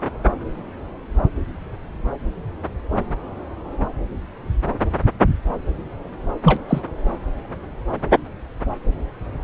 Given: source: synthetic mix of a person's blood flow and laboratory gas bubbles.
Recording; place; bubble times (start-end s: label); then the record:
Doppler ultrasound of blood flow; subclavian vein
6.42-6.60 s: bubbles
6.68-6.81 s: bubbles
From the record:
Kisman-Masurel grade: 213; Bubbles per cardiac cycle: several, 3 to 8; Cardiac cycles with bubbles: 1 to 10%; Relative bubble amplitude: loud (0.450 to 0.775); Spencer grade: 1 (occasional bubble signal discernible with the cardiac motion signal, with majority of cardiac periods free of bubbles); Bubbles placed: anywhere in the cardiac cycle